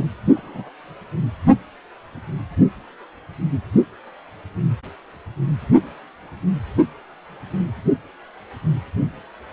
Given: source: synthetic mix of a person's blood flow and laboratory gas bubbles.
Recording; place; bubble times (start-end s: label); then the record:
Doppler ultrasound of blood flow; precordium
0.00-0.06 s: bubbles
0.35-0.71 s: bubbles
From the record:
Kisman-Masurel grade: 121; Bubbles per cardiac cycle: 1 to 2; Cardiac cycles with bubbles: 10 to 50%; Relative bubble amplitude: barely perceptible (0.100 to 0.250); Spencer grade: 2 (many but less than half of the cardiac periods contain bubble signals, singularly or in groups); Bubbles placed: anywhere in the cardiac cycle